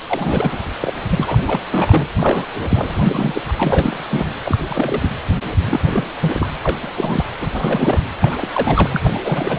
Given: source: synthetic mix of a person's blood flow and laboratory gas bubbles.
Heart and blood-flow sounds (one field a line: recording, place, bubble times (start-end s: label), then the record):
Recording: Doppler ultrasound of blood flow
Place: precordium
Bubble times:
0.07-0.58 s: bubbles
0.80-0.93 s: bubbles
1.09-1.44 s: bubbles
1.46-1.61 s: bubbles
1.71-2.07 s: bubbles
2.17-2.45 s: bubbles
2.69-3.42 s: bubbles
3.48-3.54 s: bubbles
3.56-4.04 s: bubbles
4.10-4.30 s: bubbles
4.45-5.10 s: bubbles
5.70-5.80 s: bubbles
5.86-6.04 s: bubbles
6.21-6.49 s: bubbles
6.62-6.77 s: bubbles
6.81-7.24 s: bubbles
7.40-7.48 s: bubbles
7.55-8.02 s: bubbles
8.21-8.47 s: bubbles
8.54-9.11 s: bubbles
9.13-9.59 s: bubbles
From the record:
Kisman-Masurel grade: 342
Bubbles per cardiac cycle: rolling drumbeat, 9 or more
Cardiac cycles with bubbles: 100%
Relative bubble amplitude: moderate (0.250 to 0.450)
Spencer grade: 3 (all of the cardiac periods contain showers or single bubble signals, but not dominating or overriding the cardiac motion signals)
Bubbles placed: anywhere in the cardiac cycle